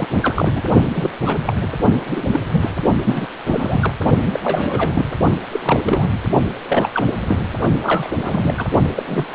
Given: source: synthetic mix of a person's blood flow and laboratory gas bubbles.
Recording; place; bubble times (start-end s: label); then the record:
Doppler ultrasound of blood flow; precordium
0.00-0.08 s: bubbles
0.22-0.61 s: bubbles
0.95-1.09 s: bubbles
1.25-1.39 s: bubbles
1.46-1.54 s: bubbles
1.61-1.69 s: bubbles
2.07-2.22 s: bubbles
2.32-2.40 s: bubbles
2.50-2.71 s: bubbles
3.03-3.27 s: bubbles
3.46-3.92 s: bubbles
4.25-4.40 s: bubbles
4.43-5.05 s: bubbles
5.51-6.08 s: bubbles
6.12-6.18 s: bubbles
6.68-6.91 s: bubbles
6.94-7.04 s: bubbles
7.26-7.42 s: bubbles
7.81-8.11 s: bubbles
8.19-8.66 s: bubbles
8.96-9.04 s: bubbles
9.06-9.25 s: bubbles
9.32-9.35 s: bubbles
From the record:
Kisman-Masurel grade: 342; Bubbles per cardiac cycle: rolling drumbeat, 9 or more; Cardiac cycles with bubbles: 100%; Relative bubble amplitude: moderate (0.250 to 0.450); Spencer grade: 3 (all of the cardiac periods contain showers or single bubble signals, but not dominating or overriding the cardiac motion signals); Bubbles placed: only in the low amplitude regions of the cardiac cycle